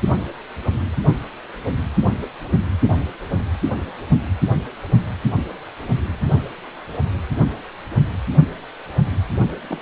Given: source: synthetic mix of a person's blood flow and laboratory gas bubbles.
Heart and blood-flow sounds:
Doppler ultrasound of blood flow; precordium
9.67-9.79 s: bubbles
From the record:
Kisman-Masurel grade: 221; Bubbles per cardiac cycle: several, 3 to 8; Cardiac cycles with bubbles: 10 to 50%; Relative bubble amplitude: barely perceptible (0.100 to 0.250); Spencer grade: 2 (many but less than half of the cardiac periods contain bubble signals, singularly or in groups); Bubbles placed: anywhere in the cardiac cycle

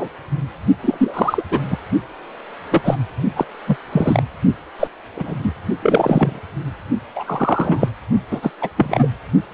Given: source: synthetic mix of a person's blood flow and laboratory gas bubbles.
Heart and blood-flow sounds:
Doppler ultrasound of blood flow; precordium
0.00-0.08 s: bubbles
0.82-1.43 s: bubbles
1.50-1.60 s: bubbles
1.70-1.77 s: bubbles
2.71-2.96 s: bubbles
3.35-3.45 s: bubbles
3.67-3.78 s: bubbles
3.92-4.23 s: bubbles
4.79-4.88 s: bubbles
5.16-5.34 s: bubbles
5.43-5.54 s: bubbles
5.82-6.39 s: bubbles
7.15-7.88 s: bubbles
8.31-8.50 s: bubbles
8.61-8.69 s: bubbles
8.77-9.07 s: bubbles
From the record:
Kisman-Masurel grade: 243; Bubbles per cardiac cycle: several, 3 to 8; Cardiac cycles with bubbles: 100%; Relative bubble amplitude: loud (0.450 to 0.775); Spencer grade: 3 (all of the cardiac periods contain showers or single bubble signals, but not dominating or overriding the cardiac motion signals); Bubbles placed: only in the low amplitude regions of the cardiac cycle

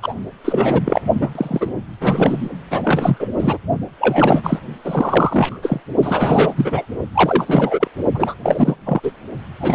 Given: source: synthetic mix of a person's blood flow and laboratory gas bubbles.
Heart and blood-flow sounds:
Doppler ultrasound of blood flow; precordium
0.00-0.14 s: bubbles
0.45-0.81 s: bubbles
0.84-1.01 s: bubbles
1.21-1.70 s: bubbles
2.00-2.49 s: bubbles
2.71-3.29 s: bubbles
3.39-3.58 s: bubbles
4.00-4.59 s: bubbles
4.84-5.59 s: bubbles
5.62-5.80 s: bubbles
6.03-6.86 s: bubbles
7.14-7.88 s: bubbles
8.14-8.34 s: bubbles
8.43-8.76 s: bubbles
8.86-9.12 s: bubbles
9.60-9.75 s: bubbles
From the record:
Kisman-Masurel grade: 343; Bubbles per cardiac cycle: rolling drumbeat, 9 or more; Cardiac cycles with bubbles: 100%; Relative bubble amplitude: loud (0.450 to 0.775); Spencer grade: 3 (all of the cardiac periods contain showers or single bubble signals, but not dominating or overriding the cardiac motion signals); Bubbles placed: only in the low amplitude regions of the cardiac cycle

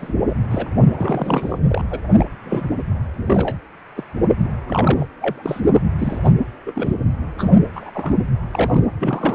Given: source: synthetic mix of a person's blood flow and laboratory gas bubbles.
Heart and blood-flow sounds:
Doppler ultrasound of blood flow; precordium
0.00-0.14 s: bubbles
0.29-0.35 s: bubbles
0.51-0.67 s: bubbles
0.88-1.59 s: bubbles
1.70-1.85 s: bubbles
1.90-2.00 s: bubbles
2.08-2.13 s: bubbles
2.18-2.25 s: bubbles
2.45-2.69 s: bubbles
3.16-3.56 s: bubbles
3.96-4.03 s: bubbles
4.44-4.49 s: bubbles
4.67-5.06 s: bubbles
5.20-5.62 s: bubbles
5.74-5.81 s: bubbles
5.98-6.35 s: bubbles
6.66-6.72 s: bubbles
6.75-6.95 s: bubbles
7.38-7.51 s: bubbles
7.74-7.90 s: bubbles
7.94-8.13 s: bubbles
8.50-8.87 s: bubbles
8.99-9.35 s: bubbles
From the record:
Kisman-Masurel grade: 242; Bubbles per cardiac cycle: several, 3 to 8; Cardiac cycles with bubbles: 100%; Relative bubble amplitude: moderate (0.250 to 0.450); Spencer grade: 3 (all of the cardiac periods contain showers or single bubble signals, but not dominating or overriding the cardiac motion signals); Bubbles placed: anywhere in the cardiac cycle

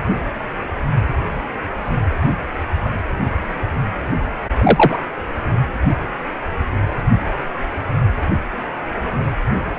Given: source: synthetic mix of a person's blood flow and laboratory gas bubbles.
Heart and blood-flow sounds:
Doppler ultrasound of blood flow; precordium
4.58-4.97 s: bubbles
From the record:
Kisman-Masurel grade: 113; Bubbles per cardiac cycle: 1 to 2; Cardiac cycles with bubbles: 1 to 10%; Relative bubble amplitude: loud (0.450 to 0.775); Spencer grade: 1 (occasional bubble signal discernible with the cardiac motion signal, with majority of cardiac periods free of bubbles); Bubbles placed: anywhere in the cardiac cycle

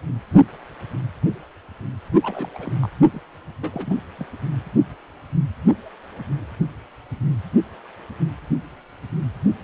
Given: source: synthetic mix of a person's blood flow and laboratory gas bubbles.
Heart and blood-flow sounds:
Doppler ultrasound of blood flow; precordium
2.22-2.48 s: bubbles
2.54-2.73 s: bubbles
2.81-2.90 s: bubbles
3.12-3.20 s: bubbles
3.61-4.01 s: bubbles
4.18-4.26 s: bubbles
From the record:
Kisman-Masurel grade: 221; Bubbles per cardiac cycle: several, 3 to 8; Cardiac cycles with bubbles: 10 to 50%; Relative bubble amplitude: barely perceptible (0.100 to 0.250); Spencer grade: 2 (many but less than half of the cardiac periods contain bubble signals, singularly or in groups); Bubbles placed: only in the low amplitude regions of the cardiac cycle

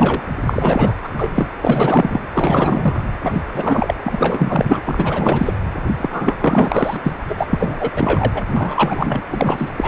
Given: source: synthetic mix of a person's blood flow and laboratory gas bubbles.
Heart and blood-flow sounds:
Doppler ultrasound of blood flow; precordium
0.00-0.23 s: bubbles
0.46-0.95 s: bubbles
1.01-1.09 s: bubbles
1.17-1.29 s: bubbles
1.34-1.48 s: bubbles
1.61-2.20 s: bubbles
2.34-3.03 s: bubbles
3.23-3.42 s: bubbles
3.54-3.94 s: bubbles
4.03-4.82 s: bubbles
4.86-5.53 s: bubbles
5.97-6.36 s: bubbles
6.41-7.15 s: bubbles
7.29-7.47 s: bubbles
7.50-7.91 s: bubbles
7.96-8.43 s: bubbles
8.56-9.21 s: bubbles
9.28-9.72 s: bubbles
9.77-9.88 s: bubbles
From the record:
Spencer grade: 4 (maximum detectable bubble signal sounding continuously throughout systole and diastole of every cardiac period, and overriding the amplitude of the normal cardiac signals); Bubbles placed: anywhere in the cardiac cycle

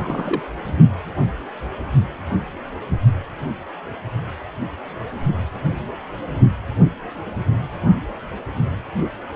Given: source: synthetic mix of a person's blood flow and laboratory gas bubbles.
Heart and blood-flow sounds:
Doppler ultrasound of blood flow; precordium
0.00-0.55 s: bubbles
From the record:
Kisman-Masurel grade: 211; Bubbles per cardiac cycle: several, 3 to 8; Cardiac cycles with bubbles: 1 to 10%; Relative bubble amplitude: barely perceptible (0.100 to 0.250); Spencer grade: 1 (occasional bubble signal discernible with the cardiac motion signal, with majority of cardiac periods free of bubbles); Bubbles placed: only in the low amplitude regions of the cardiac cycle

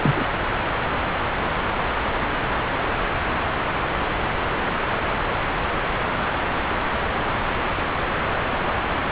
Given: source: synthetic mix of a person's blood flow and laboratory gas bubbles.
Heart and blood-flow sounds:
Doppler ultrasound of blood flow; subclavian vein
0.04-0.24 s: bubbles
From the record:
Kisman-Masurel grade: 222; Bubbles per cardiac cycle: several, 3 to 8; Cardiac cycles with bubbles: 10 to 50%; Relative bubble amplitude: moderate (0.250 to 0.450); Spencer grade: 2 (many but less than half of the cardiac periods contain bubble signals, singularly or in groups); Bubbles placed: anywhere in the cardiac cycle

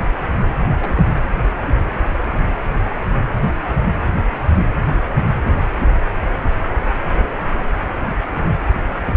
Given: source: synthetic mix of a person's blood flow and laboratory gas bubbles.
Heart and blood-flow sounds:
Doppler ultrasound of blood flow; precordium
0.81-1.03 s: bubbles
From the record:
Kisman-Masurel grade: 111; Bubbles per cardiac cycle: 1 to 2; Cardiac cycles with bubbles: 1 to 10%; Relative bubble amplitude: barely perceptible (0.100 to 0.250); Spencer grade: 1 (occasional bubble signal discernible with the cardiac motion signal, with majority of cardiac periods free of bubbles); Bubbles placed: anywhere in the cardiac cycle

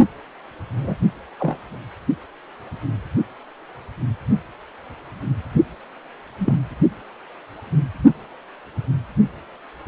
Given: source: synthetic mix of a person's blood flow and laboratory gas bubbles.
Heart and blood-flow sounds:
Doppler ultrasound of blood flow; precordium
0.74-0.94 s: bubbles
1.38-1.77 s: bubbles
6.38-6.59 s: bubbles
From the record:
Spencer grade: 2 (many but less than half of the cardiac periods contain bubble signals, singularly or in groups); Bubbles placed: only in the low amplitude regions of the cardiac cycle

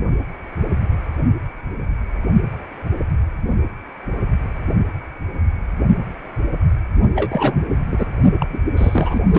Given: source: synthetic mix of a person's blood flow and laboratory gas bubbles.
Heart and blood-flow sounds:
Doppler ultrasound of blood flow; precordium
7.16-7.66 s: bubbles
7.90-8.07 s: bubbles
8.39-8.59 s: bubbles
8.76-9.20 s: bubbles
9.27-9.39 s: bubbles
From the record:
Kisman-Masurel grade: 222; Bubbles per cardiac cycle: several, 3 to 8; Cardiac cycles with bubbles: 10 to 50%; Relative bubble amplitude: moderate (0.250 to 0.450); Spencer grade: 2 (many but less than half of the cardiac periods contain bubble signals, singularly or in groups); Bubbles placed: only in the low amplitude regions of the cardiac cycle

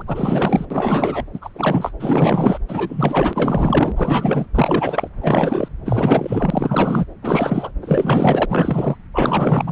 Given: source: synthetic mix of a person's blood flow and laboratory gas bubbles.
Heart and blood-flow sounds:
Doppler ultrasound of blood flow; subclavian vein
0.00-0.02 s: bubbles
0.07-0.66 s: bubbles
0.70-1.24 s: bubbles
1.33-1.39 s: bubbles
1.42-1.49 s: bubbles
1.54-1.92 s: bubbles
1.99-2.58 s: bubbles
2.68-3.92 s: bubbles
3.96-4.46 s: bubbles
4.54-5.08 s: bubbles
5.21-5.69 s: bubbles
5.86-7.06 s: bubbles
7.21-7.72 s: bubbles
7.81-8.46 s: bubbles
8.48-8.96 s: bubbles
9.13-9.72 s: bubbles
From the record:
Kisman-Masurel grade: 444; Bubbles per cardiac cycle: continuous sound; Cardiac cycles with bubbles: 100%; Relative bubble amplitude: maximal (0.775 to 0.999); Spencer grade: 4 (maximum detectable bubble signal sounding continuously throughout systole and diastole of every cardiac period, and overriding the amplitude of the normal cardiac signals); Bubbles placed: anywhere in the cardiac cycle

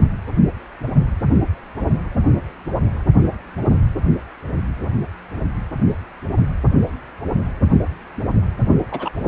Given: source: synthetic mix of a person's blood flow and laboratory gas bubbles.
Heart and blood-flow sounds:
Doppler ultrasound of blood flow; precordium
8.91-9.10 s: bubbles
9.23-9.28 s: bubbles
From the record:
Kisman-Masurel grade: 212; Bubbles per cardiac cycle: several, 3 to 8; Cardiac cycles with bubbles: 1 to 10%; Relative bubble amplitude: moderate (0.250 to 0.450); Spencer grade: 1 (occasional bubble signal discernible with the cardiac motion signal, with majority of cardiac periods free of bubbles); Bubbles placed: only in the low amplitude regions of the cardiac cycle

